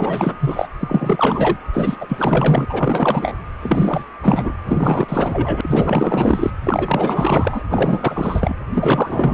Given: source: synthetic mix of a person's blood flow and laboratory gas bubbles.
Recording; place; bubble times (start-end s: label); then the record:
Doppler ultrasound of blood flow; precordium
0.00-0.36 s: bubbles
0.39-0.68 s: bubbles
0.79-1.57 s: bubbles
1.73-1.96 s: bubbles
2.00-2.65 s: bubbles
2.69-3.35 s: bubbles
3.60-4.05 s: bubbles
4.22-4.52 s: bubbles
4.65-6.50 s: bubbles
6.63-7.62 s: bubbles
7.70-8.55 s: bubbles
8.72-9.33 s: bubbles
From the record:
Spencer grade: 4 (maximum detectable bubble signal sounding continuously throughout systole and diastole of every cardiac period, and overriding the amplitude of the normal cardiac signals); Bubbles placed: anywhere in the cardiac cycle